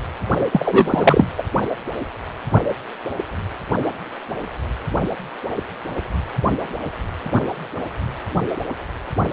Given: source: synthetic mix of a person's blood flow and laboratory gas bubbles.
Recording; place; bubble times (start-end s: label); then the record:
Doppler ultrasound of blood flow; precordium
0.52-1.26 s: bubbles
1.38-1.43 s: bubbles
From the record:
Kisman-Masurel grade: 213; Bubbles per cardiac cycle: several, 3 to 8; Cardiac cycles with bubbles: 1 to 10%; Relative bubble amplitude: loud (0.450 to 0.775); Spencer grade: 1 (occasional bubble signal discernible with the cardiac motion signal, with majority of cardiac periods free of bubbles); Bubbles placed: only in the low amplitude regions of the cardiac cycle